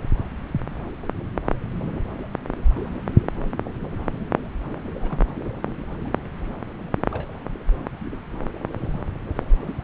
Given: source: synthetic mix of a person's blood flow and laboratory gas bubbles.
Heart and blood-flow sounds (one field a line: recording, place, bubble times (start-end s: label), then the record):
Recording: Doppler ultrasound of blood flow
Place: subclavian vein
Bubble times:
5.02-5.18 s: bubbles
7.11-7.28 s: bubbles
From the record:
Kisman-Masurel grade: 121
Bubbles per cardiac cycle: 1 to 2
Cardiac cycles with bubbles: 10 to 50%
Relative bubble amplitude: barely perceptible (0.100 to 0.250)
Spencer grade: 2 (many but less than half of the cardiac periods contain bubble signals, singularly or in groups)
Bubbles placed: anywhere in the cardiac cycle